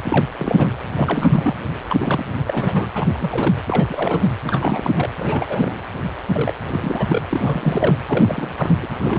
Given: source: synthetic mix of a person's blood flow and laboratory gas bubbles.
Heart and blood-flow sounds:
Doppler ultrasound of blood flow; precordium
0.05-0.26 s: bubbles
0.38-0.81 s: bubbles
0.96-1.56 s: bubbles
1.90-1.96 s: bubbles
1.98-2.25 s: bubbles
2.48-2.90 s: bubbles
2.94-3.54 s: bubbles
3.65-4.27 s: bubbles
4.44-5.09 s: bubbles
5.18-5.79 s: bubbles
6.33-6.53 s: bubbles
6.70-7.22 s: bubbles
7.29-7.97 s: bubbles
8.09-8.76 s: bubbles
8.82-8.87 s: bubbles
8.97-9.19 s: bubbles
From the record:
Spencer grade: 3 (all of the cardiac periods contain showers or single bubble signals, but not dominating or overriding the cardiac motion signals); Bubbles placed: anywhere in the cardiac cycle

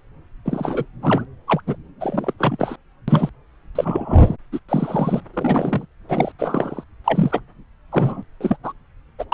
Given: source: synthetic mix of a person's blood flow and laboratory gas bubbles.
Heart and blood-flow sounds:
Doppler ultrasound of blood flow; subclavian vein
0.45-0.85 s: bubbles
1.02-1.25 s: bubbles
1.47-1.61 s: bubbles
1.67-1.76 s: bubbles
2.00-2.33 s: bubbles
2.38-2.76 s: bubbles
3.08-3.29 s: bubbles
3.75-4.36 s: bubbles
4.52-4.60 s: bubbles
4.69-5.22 s: bubbles
5.33-5.86 s: bubbles
6.08-6.32 s: bubbles
6.38-6.84 s: bubbles
7.04-7.40 s: bubbles
7.91-8.23 s: bubbles
8.40-8.56 s: bubbles
8.63-8.72 s: bubbles
9.19-9.25 s: bubbles
9.32-9.34 s: bubbles
From the record:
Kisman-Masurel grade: 243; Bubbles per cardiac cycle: several, 3 to 8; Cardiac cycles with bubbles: 100%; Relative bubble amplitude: loud (0.450 to 0.775); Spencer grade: 3 (all of the cardiac periods contain showers or single bubble signals, but not dominating or overriding the cardiac motion signals); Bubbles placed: anywhere in the cardiac cycle

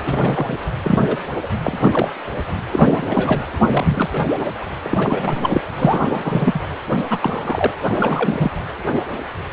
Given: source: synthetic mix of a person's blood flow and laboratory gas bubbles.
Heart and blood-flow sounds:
Doppler ultrasound of blood flow; precordium
0.01-0.57 s: bubbles
0.83-0.99 s: bubbles
1.06-1.17 s: bubbles
1.43-1.47 s: bubbles
1.63-2.09 s: bubbles
2.71-3.44 s: bubbles
3.59-4.28 s: bubbles
4.35-4.53 s: bubbles
4.83-5.62 s: bubbles
5.77-6.61 s: bubbles
7.04-7.73 s: bubbles
7.85-8.52 s: bubbles
From the record:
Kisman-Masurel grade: 332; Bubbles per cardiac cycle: rolling drumbeat, 9 or more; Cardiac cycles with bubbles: 50 to 99%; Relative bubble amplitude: moderate (0.250 to 0.450); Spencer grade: 3 (all of the cardiac periods contain showers or single bubble signals, but not dominating or overriding the cardiac motion signals); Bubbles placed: anywhere in the cardiac cycle

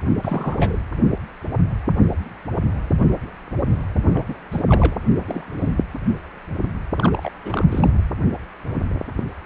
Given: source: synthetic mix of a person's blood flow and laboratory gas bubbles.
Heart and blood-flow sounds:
Doppler ultrasound of blood flow; precordium
0.22-0.83 s: bubbles
4.14-4.35 s: bubbles
4.51-4.64 s: bubbles
4.69-4.95 s: bubbles
5.02-5.05 s: bubbles
5.17-5.75 s: bubbles
6.97-7.29 s: bubbles
7.45-7.65 s: bubbles
7.71-7.91 s: bubbles
From the record:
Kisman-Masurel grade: 221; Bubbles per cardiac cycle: several, 3 to 8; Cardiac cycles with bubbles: 10 to 50%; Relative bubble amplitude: barely perceptible (0.100 to 0.250); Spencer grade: 2 (many but less than half of the cardiac periods contain bubble signals, singularly or in groups); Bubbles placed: anywhere in the cardiac cycle

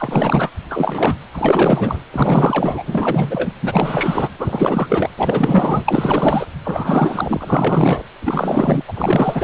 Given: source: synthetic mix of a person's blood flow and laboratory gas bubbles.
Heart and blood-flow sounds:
Doppler ultrasound of blood flow; precordium
0.00-0.49 s: bubbles
0.70-1.16 s: bubbles
1.32-2.00 s: bubbles
2.12-2.83 s: bubbles
2.86-3.53 s: bubbles
3.62-4.29 s: bubbles
4.38-5.10 s: bubbles
5.17-6.46 s: bubbles
6.64-8.03 s: bubbles
8.21-8.83 s: bubbles
8.88-9.44 s: bubbles
From the record:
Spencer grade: 4 (maximum detectable bubble signal sounding continuously throughout systole and diastole of every cardiac period, and overriding the amplitude of the normal cardiac signals); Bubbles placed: anywhere in the cardiac cycle

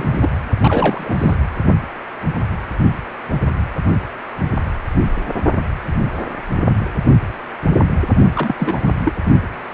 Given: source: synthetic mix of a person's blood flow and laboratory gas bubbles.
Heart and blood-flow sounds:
Doppler ultrasound of blood flow; precordium
0.00-0.18 s: bubbles
0.21-0.30 s: bubbles
0.60-1.16 s: bubbles
1.18-1.34 s: bubbles
8.34-8.55 s: bubbles
8.59-8.91 s: bubbles
9.05-9.14 s: bubbles
From the record:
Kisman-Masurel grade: 222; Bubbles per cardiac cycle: several, 3 to 8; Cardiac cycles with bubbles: 10 to 50%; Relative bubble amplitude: moderate (0.250 to 0.450); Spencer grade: 2 (many but less than half of the cardiac periods contain bubble signals, singularly or in groups); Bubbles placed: only in the low amplitude regions of the cardiac cycle

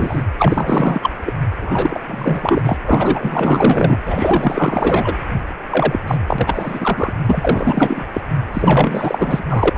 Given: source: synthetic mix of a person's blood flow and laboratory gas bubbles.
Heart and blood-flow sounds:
Doppler ultrasound of blood flow; precordium
0.00-0.23 s: bubbles
0.38-1.10 s: bubbles
1.26-1.33 s: bubbles
1.60-2.00 s: bubbles
2.06-2.77 s: bubbles
2.85-4.00 s: bubbles
4.05-5.16 s: bubbles
5.70-6.00 s: bubbles
6.07-6.17 s: bubbles
6.28-7.13 s: bubbles
7.25-8.07 s: bubbles
8.13-8.21 s: bubbles
8.53-9.45 s: bubbles
9.47-9.78 s: bubbles
From the record:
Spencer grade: 4 (maximum detectable bubble signal sounding continuously throughout systole and diastole of every cardiac period, and overriding the amplitude of the normal cardiac signals); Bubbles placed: anywhere in the cardiac cycle

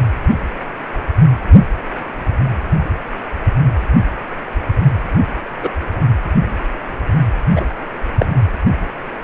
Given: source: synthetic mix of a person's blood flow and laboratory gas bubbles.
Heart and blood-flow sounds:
Doppler ultrasound of blood flow; precordium
5.63-5.70 s: bubbles
7.55-7.66 s: bubbles
8.19-8.26 s: bubbles
From the record:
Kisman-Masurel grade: 123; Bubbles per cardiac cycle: 1 to 2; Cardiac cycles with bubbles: 10 to 50%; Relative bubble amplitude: loud (0.450 to 0.775); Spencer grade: 2 (many but less than half of the cardiac periods contain bubble signals, singularly or in groups); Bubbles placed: anywhere in the cardiac cycle

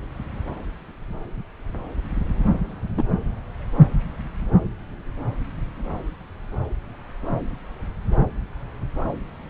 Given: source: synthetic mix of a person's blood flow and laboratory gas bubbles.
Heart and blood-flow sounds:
Doppler ultrasound of blood flow; subclavian vein
2.98-3.03 s: bubbles
From the record:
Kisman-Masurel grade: 113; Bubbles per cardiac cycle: 1 to 2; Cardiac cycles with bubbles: 1 to 10%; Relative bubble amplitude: loud (0.450 to 0.775); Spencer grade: 1 (occasional bubble signal discernible with the cardiac motion signal, with majority of cardiac periods free of bubbles); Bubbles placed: anywhere in the cardiac cycle

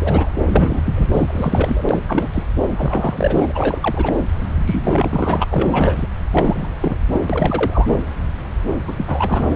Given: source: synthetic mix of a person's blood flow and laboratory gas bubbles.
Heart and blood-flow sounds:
Doppler ultrasound of blood flow; subclavian vein
0.00-0.32 s: bubbles
0.41-1.10 s: bubbles
1.14-1.83 s: bubbles
1.89-2.02 s: bubbles
2.08-2.27 s: bubbles
2.34-2.44 s: bubbles
2.77-3.52 s: bubbles
3.54-4.12 s: bubbles
4.66-5.44 s: bubbles
5.50-6.07 s: bubbles
6.31-6.68 s: bubbles
6.81-6.97 s: bubbles
7.11-7.22 s: bubbles
7.29-7.99 s: bubbles
8.87-9.56 s: bubbles
From the record:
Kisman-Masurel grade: 333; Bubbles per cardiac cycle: rolling drumbeat, 9 or more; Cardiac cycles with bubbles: 50 to 99%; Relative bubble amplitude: loud (0.450 to 0.775); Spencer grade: 3 (all of the cardiac periods contain showers or single bubble signals, but not dominating or overriding the cardiac motion signals); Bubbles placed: anywhere in the cardiac cycle

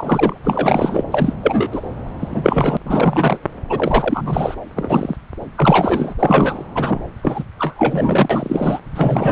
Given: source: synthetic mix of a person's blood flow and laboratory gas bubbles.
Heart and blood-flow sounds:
Doppler ultrasound of blood flow; subclavian vein
0.00-0.37 s: bubbles
0.44-1.04 s: bubbles
1.10-1.33 s: bubbles
1.43-1.81 s: bubbles
2.20-2.77 s: bubbles
2.85-3.38 s: bubbles
3.69-4.54 s: bubbles
4.76-5.16 s: bubbles
5.55-6.14 s: bubbles
6.19-6.67 s: bubbles
6.75-7.00 s: bubbles
7.22-7.43 s: bubbles
7.57-8.79 s: bubbles
8.95-9.32 s: bubbles
From the record:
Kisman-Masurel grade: 343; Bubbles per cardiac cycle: rolling drumbeat, 9 or more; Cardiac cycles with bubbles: 100%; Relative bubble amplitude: loud (0.450 to 0.775); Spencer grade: 3 (all of the cardiac periods contain showers or single bubble signals, but not dominating or overriding the cardiac motion signals); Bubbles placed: anywhere in the cardiac cycle

